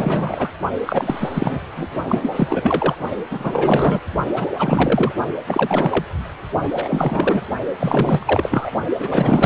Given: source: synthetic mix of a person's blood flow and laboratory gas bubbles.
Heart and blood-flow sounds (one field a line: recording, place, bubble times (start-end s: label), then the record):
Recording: Doppler ultrasound of blood flow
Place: precordium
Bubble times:
0.00-0.50 s: bubbles
0.86-1.60 s: bubbles
1.76-1.89 s: bubbles
2.05-2.29 s: bubbles
2.32-2.96 s: bubbles
3.30-4.00 s: bubbles
4.36-4.48 s: bubbles
4.58-5.12 s: bubbles
5.46-6.05 s: bubbles
6.74-7.42 s: bubbles
7.80-8.72 s: bubbles
8.99-9.46 s: bubbles
From the record:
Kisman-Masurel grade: 444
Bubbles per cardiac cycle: continuous sound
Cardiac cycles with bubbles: 100%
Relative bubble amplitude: maximal (0.775 to 0.999)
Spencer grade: 4 (maximum detectable bubble signal sounding continuously throughout systole and diastole of every cardiac period, and overriding the amplitude of the normal cardiac signals)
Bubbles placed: only in the low amplitude regions of the cardiac cycle